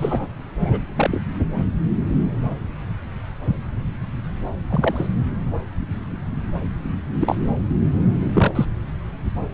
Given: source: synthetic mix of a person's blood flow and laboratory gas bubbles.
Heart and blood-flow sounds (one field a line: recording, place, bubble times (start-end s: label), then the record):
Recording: Doppler ultrasound of blood flow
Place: subclavian vein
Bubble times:
0.00-0.28 s: bubbles
0.64-0.80 s: bubbles
0.97-1.22 s: bubbles
4.69-5.07 s: bubbles
7.20-7.36 s: bubbles
8.35-8.66 s: bubbles
From the record:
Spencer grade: 2 (many but less than half of the cardiac periods contain bubble signals, singularly or in groups)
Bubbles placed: anywhere in the cardiac cycle